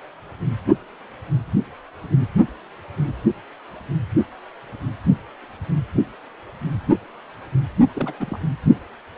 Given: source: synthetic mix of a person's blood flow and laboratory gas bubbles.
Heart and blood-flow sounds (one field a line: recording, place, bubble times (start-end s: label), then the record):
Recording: Doppler ultrasound of blood flow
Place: precordium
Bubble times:
7.96-8.13 s: bubbles
8.20-8.38 s: bubbles
From the record:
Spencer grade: 1 (occasional bubble signal discernible with the cardiac motion signal, with majority of cardiac periods free of bubbles)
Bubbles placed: anywhere in the cardiac cycle